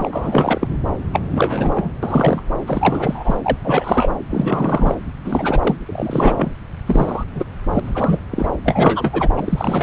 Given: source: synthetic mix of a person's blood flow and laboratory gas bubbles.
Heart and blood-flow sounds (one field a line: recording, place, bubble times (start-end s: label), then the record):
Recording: Doppler ultrasound of blood flow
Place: subclavian vein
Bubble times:
0.00-0.67 s: bubbles
1.12-1.22 s: bubbles
1.31-1.92 s: bubbles
2.03-2.43 s: bubbles
2.67-3.40 s: bubbles
3.45-3.58 s: bubbles
3.64-4.09 s: bubbles
4.29-4.95 s: bubbles
5.24-5.76 s: bubbles
5.85-6.51 s: bubbles
6.86-7.24 s: bubbles
7.34-7.44 s: bubbles
7.69-7.80 s: bubbles
7.84-8.20 s: bubbles
8.30-8.50 s: bubbles
8.63-9.28 s: bubbles
9.36-9.83 s: bubbles
From the record:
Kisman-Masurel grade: 343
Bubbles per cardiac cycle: rolling drumbeat, 9 or more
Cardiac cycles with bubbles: 100%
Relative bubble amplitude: loud (0.450 to 0.775)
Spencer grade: 3 (all of the cardiac periods contain showers or single bubble signals, but not dominating or overriding the cardiac motion signals)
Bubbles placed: anywhere in the cardiac cycle